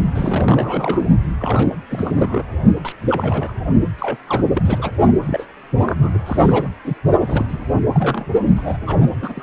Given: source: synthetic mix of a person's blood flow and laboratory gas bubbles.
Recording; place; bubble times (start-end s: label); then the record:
Doppler ultrasound of blood flow; precordium
0.15-1.05 s: bubbles
1.39-1.76 s: bubbles
1.91-2.44 s: bubbles
2.84-2.92 s: bubbles
3.02-3.53 s: bubbles
3.98-4.17 s: bubbles
4.27-4.45 s: bubbles
4.54-4.91 s: bubbles
5.26-5.45 s: bubbles
5.87-6.22 s: bubbles
6.26-6.68 s: bubbles
6.83-6.94 s: bubbles
7.21-7.58 s: bubbles
7.94-8.25 s: bubbles
8.56-8.77 s: bubbles
8.86-9.04 s: bubbles
9.22-9.43 s: bubbles
From the record:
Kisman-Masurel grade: 332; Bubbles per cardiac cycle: rolling drumbeat, 9 or more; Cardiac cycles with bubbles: 50 to 99%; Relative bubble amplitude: moderate (0.250 to 0.450); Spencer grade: 3 (all of the cardiac periods contain showers or single bubble signals, but not dominating or overriding the cardiac motion signals); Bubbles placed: only in the low amplitude regions of the cardiac cycle